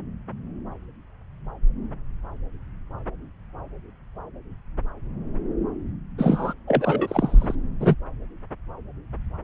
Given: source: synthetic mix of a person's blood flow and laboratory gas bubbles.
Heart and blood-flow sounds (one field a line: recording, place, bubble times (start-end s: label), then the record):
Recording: Doppler ultrasound of blood flow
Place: subclavian vein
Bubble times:
6.18-6.54 s: bubbles
6.67-7.55 s: bubbles
7.80-7.95 s: bubbles
From the record:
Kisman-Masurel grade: 213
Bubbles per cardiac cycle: several, 3 to 8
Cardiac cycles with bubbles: 1 to 10%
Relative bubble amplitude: loud (0.450 to 0.775)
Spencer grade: 1 (occasional bubble signal discernible with the cardiac motion signal, with majority of cardiac periods free of bubbles)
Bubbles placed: anywhere in the cardiac cycle